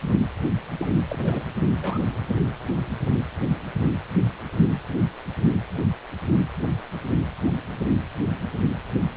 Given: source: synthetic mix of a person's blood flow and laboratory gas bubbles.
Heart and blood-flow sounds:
Doppler ultrasound of blood flow; precordium
0.71-0.86 s: bubbles
1.08-1.43 s: bubbles
1.81-2.13 s: bubbles
From the record:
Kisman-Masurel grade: 221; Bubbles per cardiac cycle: several, 3 to 8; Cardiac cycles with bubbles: 10 to 50%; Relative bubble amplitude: barely perceptible (0.100 to 0.250); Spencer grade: 2 (many but less than half of the cardiac periods contain bubble signals, singularly or in groups); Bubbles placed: anywhere in the cardiac cycle

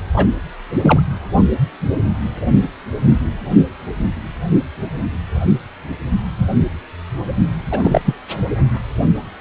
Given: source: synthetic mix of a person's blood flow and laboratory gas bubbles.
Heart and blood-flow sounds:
Doppler ultrasound of blood flow; precordium
0.13-0.26 s: bubbles
0.82-1.02 s: bubbles
7.71-7.79 s: bubbles
7.82-8.02 s: bubbles
8.05-8.14 s: bubbles
From the record:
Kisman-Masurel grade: 223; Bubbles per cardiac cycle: several, 3 to 8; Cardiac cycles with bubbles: 10 to 50%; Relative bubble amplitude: loud (0.450 to 0.775); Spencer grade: 2 (many but less than half of the cardiac periods contain bubble signals, singularly or in groups); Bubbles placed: only in the low amplitude regions of the cardiac cycle

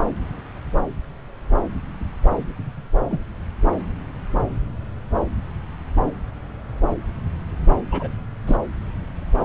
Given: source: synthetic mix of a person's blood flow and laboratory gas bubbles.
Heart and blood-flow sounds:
Doppler ultrasound of blood flow; subclavian vein
3.10-3.19 s: bubbles
7.92-8.09 s: bubbles
8.46-8.57 s: bubbles
From the record:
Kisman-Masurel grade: 122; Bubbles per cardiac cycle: 1 to 2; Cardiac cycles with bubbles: 10 to 50%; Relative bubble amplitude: moderate (0.250 to 0.450); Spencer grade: 2 (many but less than half of the cardiac periods contain bubble signals, singularly or in groups); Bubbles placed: anywhere in the cardiac cycle

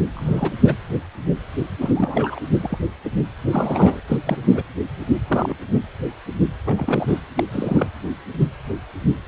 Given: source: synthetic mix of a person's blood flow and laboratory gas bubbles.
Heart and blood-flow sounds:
Doppler ultrasound of blood flow; precordium
0.13-0.54 s: bubbles
0.64-0.75 s: bubbles
1.81-1.92 s: bubbles
1.95-2.39 s: bubbles
2.62-2.78 s: bubbles
3.04-3.10 s: bubbles
3.52-4.00 s: bubbles
4.08-4.17 s: bubbles
4.25-4.38 s: bubbles
4.48-4.63 s: bubbles
5.27-5.55 s: bubbles
5.74-5.80 s: bubbles
6.65-7.22 s: bubbles
7.35-7.43 s: bubbles
7.51-7.88 s: bubbles
From the record:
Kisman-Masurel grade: 232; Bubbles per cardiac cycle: several, 3 to 8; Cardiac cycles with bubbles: 50 to 99%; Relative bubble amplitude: moderate (0.250 to 0.450); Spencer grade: 3 (all of the cardiac periods contain showers or single bubble signals, but not dominating or overriding the cardiac motion signals); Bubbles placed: anywhere in the cardiac cycle

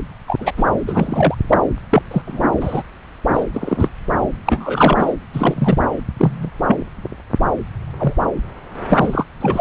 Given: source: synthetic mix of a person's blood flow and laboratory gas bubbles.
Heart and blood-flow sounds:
Doppler ultrasound of blood flow; subclavian vein
0.27-0.52 s: bubbles
0.57-0.64 s: bubbles
0.87-1.35 s: bubbles
1.49-1.58 s: bubbles
1.90-2.02 s: bubbles
2.11-2.22 s: bubbles
2.27-2.45 s: bubbles
2.60-2.83 s: bubbles
3.33-3.44 s: bubbles
3.52-3.88 s: bubbles
4.46-5.13 s: bubbles
5.33-5.79 s: bubbles
6.19-6.50 s: bubbles
6.67-6.78 s: bubbles
8.00-8.13 s: bubbles
8.89-9.24 s: bubbles
9.40-9.61 s: bubbles
From the record:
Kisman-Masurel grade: 233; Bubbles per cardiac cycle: several, 3 to 8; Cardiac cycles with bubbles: 50 to 99%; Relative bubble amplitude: loud (0.450 to 0.775); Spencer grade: 3 (all of the cardiac periods contain showers or single bubble signals, but not dominating or overriding the cardiac motion signals); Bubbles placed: anywhere in the cardiac cycle

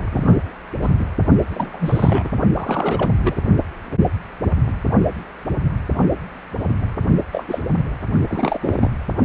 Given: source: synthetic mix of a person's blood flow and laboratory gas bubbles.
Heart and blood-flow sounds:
Doppler ultrasound of blood flow; precordium
0.12-0.49 s: bubbles
0.81-0.90 s: bubbles
0.99-1.05 s: bubbles
1.49-2.29 s: bubbles
2.52-3.10 s: bubbles
3.25-3.37 s: bubbles
7.32-7.59 s: bubbles
7.76-7.83 s: bubbles
8.29-8.90 s: bubbles
From the record:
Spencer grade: 2 (many but less than half of the cardiac periods contain bubble signals, singularly or in groups); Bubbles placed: only in the low amplitude regions of the cardiac cycle

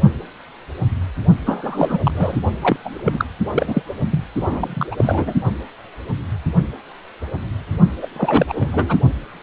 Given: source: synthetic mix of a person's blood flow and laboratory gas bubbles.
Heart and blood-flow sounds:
Doppler ultrasound of blood flow; precordium
1.46-2.00 s: bubbles
2.03-2.11 s: bubbles
2.14-2.41 s: bubbles
2.61-2.77 s: bubbles
2.85-2.90 s: bubbles
2.92-3.25 s: bubbles
3.52-3.82 s: bubbles
4.11-4.24 s: bubbles
4.39-4.87 s: bubbles
4.91-5.33 s: bubbles
8.01-8.07 s: bubbles
8.16-8.97 s: bubbles
From the record:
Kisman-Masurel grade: 332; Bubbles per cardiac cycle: rolling drumbeat, 9 or more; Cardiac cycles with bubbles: 50 to 99%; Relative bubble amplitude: moderate (0.250 to 0.450); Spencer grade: 3 (all of the cardiac periods contain showers or single bubble signals, but not dominating or overriding the cardiac motion signals); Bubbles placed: only in the low amplitude regions of the cardiac cycle

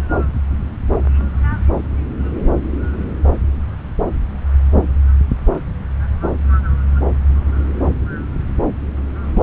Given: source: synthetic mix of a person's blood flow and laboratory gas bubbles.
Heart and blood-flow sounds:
Doppler ultrasound of blood flow; subclavian vein
9.29-9.41 s: bubbles
From the record:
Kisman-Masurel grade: 111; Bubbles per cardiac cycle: 1 to 2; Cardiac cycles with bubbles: 1 to 10%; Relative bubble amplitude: barely perceptible (0.100 to 0.250); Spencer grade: 1 (occasional bubble signal discernible with the cardiac motion signal, with majority of cardiac periods free of bubbles); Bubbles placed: anywhere in the cardiac cycle

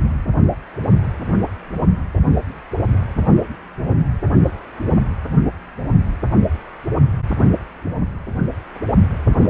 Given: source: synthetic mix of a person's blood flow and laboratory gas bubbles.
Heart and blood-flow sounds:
Doppler ultrasound of blood flow; precordium
9.29-9.49 s: bubbles
From the record:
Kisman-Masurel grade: 211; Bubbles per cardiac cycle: several, 3 to 8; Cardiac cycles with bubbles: 1 to 10%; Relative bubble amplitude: barely perceptible (0.100 to 0.250); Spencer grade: 1 (occasional bubble signal discernible with the cardiac motion signal, with majority of cardiac periods free of bubbles); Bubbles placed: anywhere in the cardiac cycle

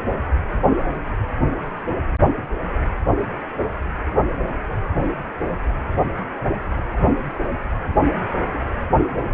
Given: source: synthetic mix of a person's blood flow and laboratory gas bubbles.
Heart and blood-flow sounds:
Doppler ultrasound of blood flow; precordium
3.59-3.66 s: bubbles
From the record:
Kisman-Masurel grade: 111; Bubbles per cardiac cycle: 1 to 2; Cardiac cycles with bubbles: 1 to 10%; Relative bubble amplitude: barely perceptible (0.100 to 0.250); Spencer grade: 1 (occasional bubble signal discernible with the cardiac motion signal, with majority of cardiac periods free of bubbles); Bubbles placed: anywhere in the cardiac cycle

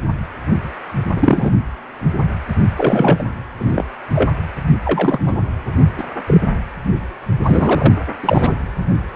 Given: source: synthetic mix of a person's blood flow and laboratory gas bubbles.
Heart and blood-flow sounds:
Doppler ultrasound of blood flow; precordium
1.16-1.50 s: bubbles
2.77-3.24 s: bubbles
3.60-3.85 s: bubbles
4.15-4.30 s: bubbles
4.85-5.19 s: bubbles
5.25-5.33 s: bubbles
5.97-6.04 s: bubbles
6.26-6.40 s: bubbles
7.46-7.94 s: bubbles
8.23-8.54 s: bubbles
From the record:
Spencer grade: 2 (many but less than half of the cardiac periods contain bubble signals, singularly or in groups); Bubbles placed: anywhere in the cardiac cycle

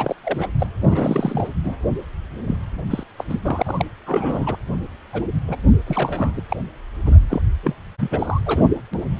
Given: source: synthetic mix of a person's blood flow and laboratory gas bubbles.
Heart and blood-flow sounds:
Doppler ultrasound of blood flow; precordium
0.00-0.14 s: bubbles
0.23-0.48 s: bubbles
0.59-0.67 s: bubbles
0.80-1.47 s: bubbles
1.64-1.75 s: bubbles
2.47-2.56 s: bubbles
2.90-3.04 s: bubbles
3.17-3.25 s: bubbles
3.29-3.39 s: bubbles
3.44-3.62 s: bubbles
3.65-3.85 s: bubbles
4.06-4.56 s: bubbles
5.12-5.25 s: bubbles
5.48-5.57 s: bubbles
5.87-6.41 s: bubbles
6.49-6.57 s: bubbles
7.06-7.18 s: bubbles
7.30-7.42 s: bubbles
7.63-7.75 s: bubbles
8.00-8.41 s: bubbles
8.46-8.70 s: bubbles
8.93-9.05 s: bubbles
From the record:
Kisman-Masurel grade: 342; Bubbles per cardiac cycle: rolling drumbeat, 9 or more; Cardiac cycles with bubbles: 100%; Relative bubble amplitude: moderate (0.250 to 0.450); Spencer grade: 3 (all of the cardiac periods contain showers or single bubble signals, but not dominating or overriding the cardiac motion signals); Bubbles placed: anywhere in the cardiac cycle

